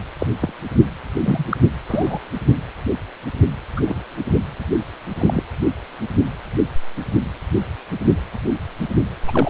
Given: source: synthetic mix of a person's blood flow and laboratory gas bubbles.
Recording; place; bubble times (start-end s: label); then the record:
Doppler ultrasound of blood flow; precordium
0.18-0.27 s: bubbles
0.40-0.52 s: bubbles
1.25-1.44 s: bubbles
1.50-1.57 s: bubbles
1.88-2.19 s: bubbles
3.77-3.81 s: bubbles
3.87-4.02 s: bubbles
5.19-5.42 s: bubbles
9.28-9.50 s: bubbles
From the record:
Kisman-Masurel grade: 122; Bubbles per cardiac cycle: 1 to 2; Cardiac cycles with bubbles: 10 to 50%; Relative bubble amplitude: moderate (0.250 to 0.450); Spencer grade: 2 (many but less than half of the cardiac periods contain bubble signals, singularly or in groups); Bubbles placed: anywhere in the cardiac cycle